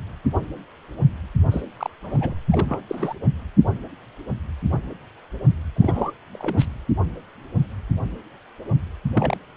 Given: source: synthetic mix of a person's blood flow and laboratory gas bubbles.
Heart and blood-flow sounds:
Doppler ultrasound of blood flow; precordium
1.51-1.62 s: bubbles
1.77-1.90 s: bubbles
2.03-2.34 s: bubbles
2.51-2.80 s: bubbles
2.88-3.13 s: bubbles
5.75-6.12 s: bubbles
6.33-6.65 s: bubbles
9.13-9.38 s: bubbles
From the record:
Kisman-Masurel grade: 222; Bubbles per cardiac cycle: several, 3 to 8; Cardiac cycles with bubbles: 10 to 50%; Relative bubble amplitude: moderate (0.250 to 0.450); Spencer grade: 2 (many but less than half of the cardiac periods contain bubble signals, singularly or in groups); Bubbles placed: anywhere in the cardiac cycle

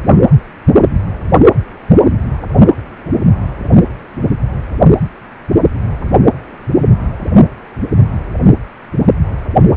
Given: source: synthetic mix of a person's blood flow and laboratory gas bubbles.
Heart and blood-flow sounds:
Doppler ultrasound of blood flow; precordium
no bubbles
From the record:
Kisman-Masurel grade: 000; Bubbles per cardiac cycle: 0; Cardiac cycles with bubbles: 0%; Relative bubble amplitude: no bubbles discernible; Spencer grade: 0 (complete lack of bubble signals)

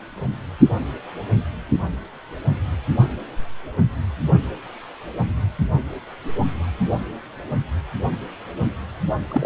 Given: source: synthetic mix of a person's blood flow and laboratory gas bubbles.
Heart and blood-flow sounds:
Doppler ultrasound of blood flow; precordium
9.28-9.46 s: bubbles
From the record:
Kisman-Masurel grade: 212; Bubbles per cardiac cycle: several, 3 to 8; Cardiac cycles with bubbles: 1 to 10%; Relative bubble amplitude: moderate (0.250 to 0.450); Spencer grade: 1 (occasional bubble signal discernible with the cardiac motion signal, with majority of cardiac periods free of bubbles); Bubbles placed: anywhere in the cardiac cycle

